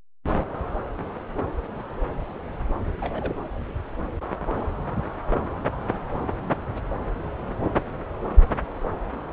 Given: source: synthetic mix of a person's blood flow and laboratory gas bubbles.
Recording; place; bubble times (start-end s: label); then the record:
Doppler ultrasound of blood flow; subclavian vein
3.00-3.33 s: bubbles
From the record:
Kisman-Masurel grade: 111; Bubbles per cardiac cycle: 1 to 2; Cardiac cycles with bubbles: 1 to 10%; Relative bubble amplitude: barely perceptible (0.100 to 0.250); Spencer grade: 1 (occasional bubble signal discernible with the cardiac motion signal, with majority of cardiac periods free of bubbles); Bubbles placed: anywhere in the cardiac cycle